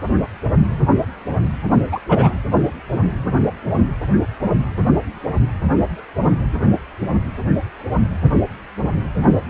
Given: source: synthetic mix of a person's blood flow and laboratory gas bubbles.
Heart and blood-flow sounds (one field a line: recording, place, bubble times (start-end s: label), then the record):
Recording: Doppler ultrasound of blood flow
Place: precordium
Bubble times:
1.92-1.99 s: bubbles
2.09-2.33 s: bubbles
From the record:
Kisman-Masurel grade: 113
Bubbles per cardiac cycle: 1 to 2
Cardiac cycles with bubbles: 1 to 10%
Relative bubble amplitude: loud (0.450 to 0.775)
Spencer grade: 1 (occasional bubble signal discernible with the cardiac motion signal, with majority of cardiac periods free of bubbles)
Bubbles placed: anywhere in the cardiac cycle